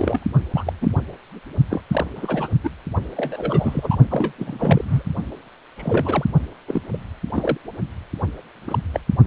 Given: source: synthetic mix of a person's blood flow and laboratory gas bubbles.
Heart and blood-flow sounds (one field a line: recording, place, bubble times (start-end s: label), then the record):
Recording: Doppler ultrasound of blood flow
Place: precordium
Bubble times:
0.00-0.27 s: bubbles
0.54-0.73 s: bubbles
0.81-0.93 s: bubbles
1.70-1.82 s: bubbles
1.91-2.04 s: bubbles
2.15-2.48 s: bubbles
2.63-2.70 s: bubbles
3.16-3.96 s: bubbles
4.09-4.32 s: bubbles
4.38-5.02 s: bubbles
5.76-6.25 s: bubbles
6.67-6.82 s: bubbles
6.93-6.98 s: bubbles
7.33-7.58 s: bubbles
8.67-8.79 s: bubbles
8.93-9.00 s: bubbles
From the record:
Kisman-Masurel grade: 242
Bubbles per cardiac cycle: several, 3 to 8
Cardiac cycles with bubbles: 100%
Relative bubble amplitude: moderate (0.250 to 0.450)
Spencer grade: 3 (all of the cardiac periods contain showers or single bubble signals, but not dominating or overriding the cardiac motion signals)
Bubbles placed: only in the low amplitude regions of the cardiac cycle